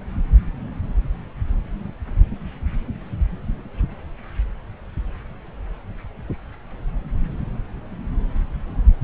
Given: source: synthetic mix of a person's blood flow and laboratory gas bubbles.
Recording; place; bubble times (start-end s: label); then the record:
Doppler ultrasound of blood flow; subclavian vein
no bubbles
From the record:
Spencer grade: 0 (complete lack of bubble signals)